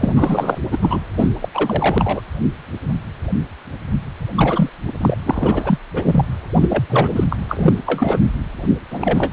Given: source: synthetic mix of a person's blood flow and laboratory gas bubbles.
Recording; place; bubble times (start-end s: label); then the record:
Doppler ultrasound of blood flow; precordium
0.00-0.58 s: bubbles
0.71-0.78 s: bubbles
0.81-1.01 s: bubbles
1.17-1.29 s: bubbles
1.42-1.48 s: bubbles
1.54-2.21 s: bubbles
4.35-4.69 s: bubbles
4.87-4.92 s: bubbles
4.98-5.17 s: bubbles
5.23-5.78 s: bubbles
5.91-6.25 s: bubbles
6.54-6.84 s: bubbles
6.89-7.24 s: bubbles
7.30-7.36 s: bubbles
7.49-7.73 s: bubbles
7.86-8.19 s: bubbles
8.90-9.33 s: bubbles
From the record:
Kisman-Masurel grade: 333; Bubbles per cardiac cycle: rolling drumbeat, 9 or more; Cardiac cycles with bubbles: 50 to 99%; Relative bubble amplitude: loud (0.450 to 0.775); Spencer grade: 3 (all of the cardiac periods contain showers or single bubble signals, but not dominating or overriding the cardiac motion signals); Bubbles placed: anywhere in the cardiac cycle